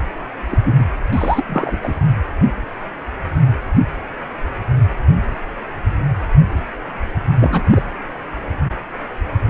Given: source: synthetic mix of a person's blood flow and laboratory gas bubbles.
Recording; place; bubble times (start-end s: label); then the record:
Doppler ultrasound of blood flow; precordium
0.51-0.58 s: bubbles
0.64-0.74 s: bubbles
0.79-0.84 s: bubbles
1.12-1.44 s: bubbles
1.48-1.77 s: bubbles
1.82-1.95 s: bubbles
7.40-7.64 s: bubbles
7.70-7.83 s: bubbles
From the record:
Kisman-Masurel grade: 222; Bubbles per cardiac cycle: several, 3 to 8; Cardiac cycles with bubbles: 10 to 50%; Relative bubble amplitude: moderate (0.250 to 0.450); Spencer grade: 2 (many but less than half of the cardiac periods contain bubble signals, singularly or in groups); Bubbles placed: anywhere in the cardiac cycle